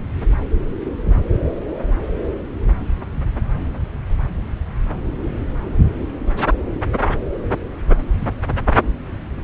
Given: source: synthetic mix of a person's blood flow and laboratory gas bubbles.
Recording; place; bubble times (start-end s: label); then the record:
Doppler ultrasound of blood flow; subclavian vein
no bubbles
From the record:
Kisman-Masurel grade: 000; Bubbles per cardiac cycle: 0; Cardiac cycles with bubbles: 0%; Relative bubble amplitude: no bubbles discernible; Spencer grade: 0 (complete lack of bubble signals)